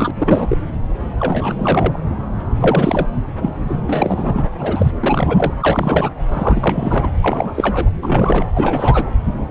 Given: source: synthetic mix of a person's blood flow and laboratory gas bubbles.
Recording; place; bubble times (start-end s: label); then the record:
Doppler ultrasound of blood flow; subclavian vein
0.00-0.11 s: bubbles
0.20-0.57 s: bubbles
1.16-1.98 s: bubbles
2.56-3.06 s: bubbles
3.41-3.54 s: bubbles
3.64-3.76 s: bubbles
3.87-4.49 s: bubbles
4.58-4.92 s: bubbles
5.00-5.52 s: bubbles
5.60-6.10 s: bubbles
6.33-7.11 s: bubbles
7.21-7.91 s: bubbles
8.02-8.45 s: bubbles
8.54-9.11 s: bubbles
From the record:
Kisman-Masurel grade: 333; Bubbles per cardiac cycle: rolling drumbeat, 9 or more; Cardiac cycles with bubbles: 50 to 99%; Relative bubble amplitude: loud (0.450 to 0.775); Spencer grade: 3 (all of the cardiac periods contain showers or single bubble signals, but not dominating or overriding the cardiac motion signals); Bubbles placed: anywhere in the cardiac cycle